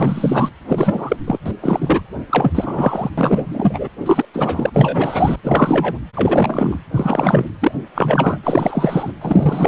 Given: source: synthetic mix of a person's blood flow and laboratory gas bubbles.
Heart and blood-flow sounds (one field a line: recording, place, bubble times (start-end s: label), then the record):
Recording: Doppler ultrasound of blood flow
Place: precordium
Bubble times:
0.00-0.49 s: bubbles
0.68-1.16 s: bubbles
1.26-1.39 s: bubbles
1.45-1.51 s: bubbles
1.60-2.01 s: bubbles
2.29-3.10 s: bubbles
3.18-3.88 s: bubbles
4.05-4.26 s: bubbles
4.33-4.70 s: bubbles
4.73-5.36 s: bubbles
5.43-5.98 s: bubbles
6.15-6.79 s: bubbles
6.92-7.46 s: bubbles
7.61-7.72 s: bubbles
7.95-8.39 s: bubbles
8.43-9.12 s: bubbles
9.21-9.68 s: bubbles
From the record:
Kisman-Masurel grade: 343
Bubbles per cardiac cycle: rolling drumbeat, 9 or more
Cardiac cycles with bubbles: 100%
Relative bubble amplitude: loud (0.450 to 0.775)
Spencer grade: 3 (all of the cardiac periods contain showers or single bubble signals, but not dominating or overriding the cardiac motion signals)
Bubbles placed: anywhere in the cardiac cycle